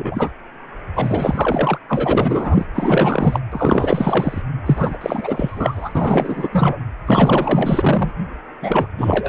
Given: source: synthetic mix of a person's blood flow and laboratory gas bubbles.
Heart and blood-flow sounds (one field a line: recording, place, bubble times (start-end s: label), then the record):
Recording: Doppler ultrasound of blood flow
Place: precordium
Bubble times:
0.00-0.32 s: bubbles
0.95-1.78 s: bubbles
1.89-2.65 s: bubbles
2.74-3.40 s: bubbles
3.51-4.42 s: bubbles
4.66-4.97 s: bubbles
5.00-6.49 s: bubbles
6.51-6.77 s: bubbles
7.06-8.12 s: bubbles
8.62-8.88 s: bubbles
8.97-9.29 s: bubbles
From the record:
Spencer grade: 4 (maximum detectable bubble signal sounding continuously throughout systole and diastole of every cardiac period, and overriding the amplitude of the normal cardiac signals)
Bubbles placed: anywhere in the cardiac cycle